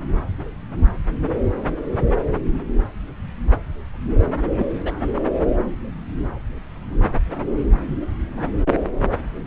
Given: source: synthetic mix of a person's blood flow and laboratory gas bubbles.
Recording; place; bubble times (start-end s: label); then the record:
Doppler ultrasound of blood flow; subclavian vein
4.58-4.66 s: bubbles
4.83-4.95 s: bubbles
5.16-5.21 s: bubbles
From the record:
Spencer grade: 1 (occasional bubble signal discernible with the cardiac motion signal, with majority of cardiac periods free of bubbles); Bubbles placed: anywhere in the cardiac cycle